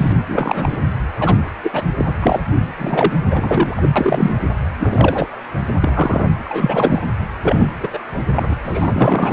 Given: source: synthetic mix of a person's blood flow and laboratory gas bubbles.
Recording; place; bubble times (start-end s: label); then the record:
Doppler ultrasound of blood flow; precordium
0.00-0.12 s: bubbles
0.28-0.78 s: bubbles
1.19-1.35 s: bubbles
1.63-1.71 s: bubbles
1.73-1.84 s: bubbles
1.97-2.13 s: bubbles
2.21-2.42 s: bubbles
2.77-3.12 s: bubbles
3.30-3.87 s: bubbles
3.95-4.38 s: bubbles
4.79-5.26 s: bubbles
5.83-6.26 s: bubbles
6.45-7.00 s: bubbles
7.43-7.68 s: bubbles
7.80-7.89 s: bubbles
7.93-8.00 s: bubbles
8.35-8.56 s: bubbles
8.63-9.33 s: bubbles
From the record:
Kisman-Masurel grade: 243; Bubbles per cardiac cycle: several, 3 to 8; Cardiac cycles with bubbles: 100%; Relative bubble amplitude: loud (0.450 to 0.775); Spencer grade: 3 (all of the cardiac periods contain showers or single bubble signals, but not dominating or overriding the cardiac motion signals); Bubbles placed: anywhere in the cardiac cycle